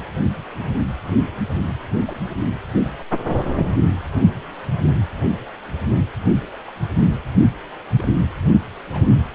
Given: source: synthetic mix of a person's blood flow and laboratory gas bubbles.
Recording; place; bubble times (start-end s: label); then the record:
Doppler ultrasound of blood flow; precordium
2.05-2.22 s: bubbles
7.97-8.08 s: bubbles
8.92-9.06 s: bubbles
From the record:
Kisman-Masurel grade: 121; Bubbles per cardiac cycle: 1 to 2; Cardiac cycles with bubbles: 10 to 50%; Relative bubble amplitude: barely perceptible (0.100 to 0.250); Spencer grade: 2 (many but less than half of the cardiac periods contain bubble signals, singularly or in groups); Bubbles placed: only in the low amplitude regions of the cardiac cycle